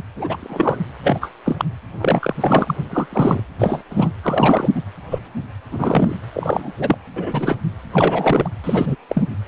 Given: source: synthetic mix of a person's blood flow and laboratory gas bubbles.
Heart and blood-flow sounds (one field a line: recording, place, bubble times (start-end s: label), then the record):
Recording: Doppler ultrasound of blood flow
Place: precordium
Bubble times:
0.15-0.82 s: bubbles
1.03-1.32 s: bubbles
1.46-1.65 s: bubbles
1.98-2.35 s: bubbles
2.41-2.75 s: bubbles
2.90-3.06 s: bubbles
3.12-3.41 s: bubbles
3.58-3.83 s: bubbles
3.90-4.09 s: bubbles
4.22-4.68 s: bubbles
4.75-4.82 s: bubbles
5.11-5.20 s: bubbles
5.71-6.15 s: bubbles
6.33-6.71 s: bubbles
6.78-6.97 s: bubbles
7.16-7.57 s: bubbles
7.92-8.48 s: bubbles
8.63-8.96 s: bubbles
9.09-9.23 s: bubbles
From the record:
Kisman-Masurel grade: 233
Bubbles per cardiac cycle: several, 3 to 8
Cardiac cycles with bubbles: 50 to 99%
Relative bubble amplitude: loud (0.450 to 0.775)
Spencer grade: 3 (all of the cardiac periods contain showers or single bubble signals, but not dominating or overriding the cardiac motion signals)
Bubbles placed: anywhere in the cardiac cycle